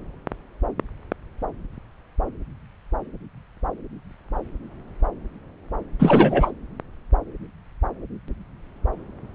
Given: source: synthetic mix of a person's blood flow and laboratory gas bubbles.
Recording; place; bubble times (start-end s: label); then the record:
Doppler ultrasound of blood flow; subclavian vein
5.99-6.51 s: bubbles
From the record:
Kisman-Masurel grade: 213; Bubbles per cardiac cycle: several, 3 to 8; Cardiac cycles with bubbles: 1 to 10%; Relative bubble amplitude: loud (0.450 to 0.775); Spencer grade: 1 (occasional bubble signal discernible with the cardiac motion signal, with majority of cardiac periods free of bubbles); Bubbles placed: anywhere in the cardiac cycle